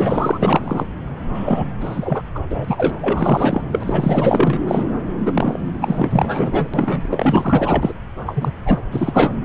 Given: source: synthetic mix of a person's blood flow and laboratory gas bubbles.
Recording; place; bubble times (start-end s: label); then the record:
Doppler ultrasound of blood flow; subclavian vein
0.00-0.85 s: bubbles
1.34-1.64 s: bubbles
1.80-2.23 s: bubbles
2.35-2.39 s: bubbles
2.50-2.96 s: bubbles
3.00-3.62 s: bubbles
3.71-4.62 s: bubbles
4.67-4.84 s: bubbles
5.25-5.59 s: bubbles
5.81-6.70 s: bubbles
6.74-7.93 s: bubbles
8.26-8.51 s: bubbles
8.65-8.79 s: bubbles
8.91-9.37 s: bubbles
From the record:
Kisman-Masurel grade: 444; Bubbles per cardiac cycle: continuous sound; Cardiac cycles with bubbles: 100%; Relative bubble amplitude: maximal (0.775 to 0.999); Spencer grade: 4 (maximum detectable bubble signal sounding continuously throughout systole and diastole of every cardiac period, and overriding the amplitude of the normal cardiac signals); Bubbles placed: anywhere in the cardiac cycle